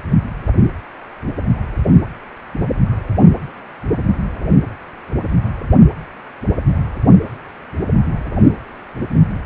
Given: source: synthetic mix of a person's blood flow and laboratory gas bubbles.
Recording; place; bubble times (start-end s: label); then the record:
Doppler ultrasound of blood flow; precordium
no bubbles
From the record:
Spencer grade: 0 (complete lack of bubble signals)